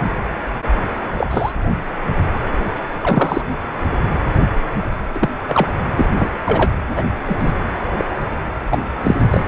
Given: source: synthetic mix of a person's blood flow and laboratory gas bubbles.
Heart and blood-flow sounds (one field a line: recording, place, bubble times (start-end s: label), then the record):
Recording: Doppler ultrasound of blood flow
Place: precordium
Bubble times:
1.18-1.27 s: bubbles
1.30-1.52 s: bubbles
3.03-3.43 s: bubbles
5.14-5.29 s: bubbles
5.48-5.67 s: bubbles
5.97-6.06 s: bubbles
6.17-6.33 s: bubbles
6.44-6.75 s: bubbles
6.96-7.03 s: bubbles
7.26-7.53 s: bubbles
7.98-8.05 s: bubbles
8.71-8.78 s: bubbles
9.03-9.15 s: bubbles
9.33-9.46 s: bubbles
From the record:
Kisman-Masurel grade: 233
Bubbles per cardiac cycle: several, 3 to 8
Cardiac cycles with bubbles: 50 to 99%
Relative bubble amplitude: loud (0.450 to 0.775)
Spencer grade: 3 (all of the cardiac periods contain showers or single bubble signals, but not dominating or overriding the cardiac motion signals)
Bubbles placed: anywhere in the cardiac cycle